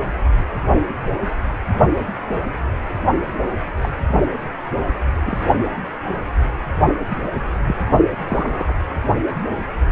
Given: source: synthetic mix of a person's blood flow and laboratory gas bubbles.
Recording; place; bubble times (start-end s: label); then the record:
Doppler ultrasound of blood flow; precordium
3.81-3.89 s: bubbles
5.25-5.41 s: bubbles
7.08-7.17 s: bubbles
7.65-7.76 s: bubbles
8.28-8.77 s: bubbles
From the record:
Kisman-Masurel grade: 122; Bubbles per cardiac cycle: 1 to 2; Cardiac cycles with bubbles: 10 to 50%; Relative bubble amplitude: moderate (0.250 to 0.450); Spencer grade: 2 (many but less than half of the cardiac periods contain bubble signals, singularly or in groups); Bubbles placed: only in the low amplitude regions of the cardiac cycle